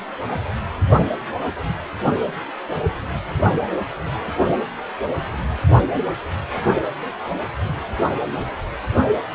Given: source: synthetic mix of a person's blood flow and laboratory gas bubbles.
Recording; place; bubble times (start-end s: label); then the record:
Doppler ultrasound of blood flow; precordium
no bubbles
From the record:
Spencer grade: 0 (complete lack of bubble signals)